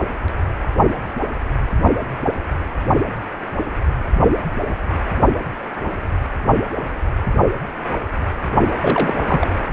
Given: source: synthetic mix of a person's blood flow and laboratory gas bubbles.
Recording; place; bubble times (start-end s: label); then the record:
Doppler ultrasound of blood flow; precordium
8.80-9.15 s: bubbles
9.27-9.48 s: bubbles
From the record:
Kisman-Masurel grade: 212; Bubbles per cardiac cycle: several, 3 to 8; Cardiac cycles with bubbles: 1 to 10%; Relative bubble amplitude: moderate (0.250 to 0.450); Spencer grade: 1 (occasional bubble signal discernible with the cardiac motion signal, with majority of cardiac periods free of bubbles); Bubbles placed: only in the low amplitude regions of the cardiac cycle